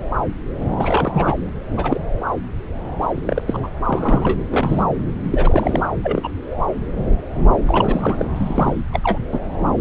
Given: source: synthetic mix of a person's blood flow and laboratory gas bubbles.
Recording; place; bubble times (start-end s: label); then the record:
Doppler ultrasound of blood flow; subclavian vein
0.76-1.34 s: bubbles
1.77-2.00 s: bubbles
3.01-3.44 s: bubbles
3.46-3.58 s: bubbles
3.62-3.69 s: bubbles
3.85-4.35 s: bubbles
4.50-4.83 s: bubbles
5.24-5.90 s: bubbles
6.03-6.29 s: bubbles
7.67-8.25 s: bubbles
8.35-8.82 s: bubbles
8.92-9.00 s: bubbles
9.03-9.18 s: bubbles
9.31-9.39 s: bubbles
From the record:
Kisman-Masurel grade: 232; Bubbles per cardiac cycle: several, 3 to 8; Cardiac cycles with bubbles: 50 to 99%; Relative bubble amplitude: moderate (0.250 to 0.450); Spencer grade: 3 (all of the cardiac periods contain showers or single bubble signals, but not dominating or overriding the cardiac motion signals); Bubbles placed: anywhere in the cardiac cycle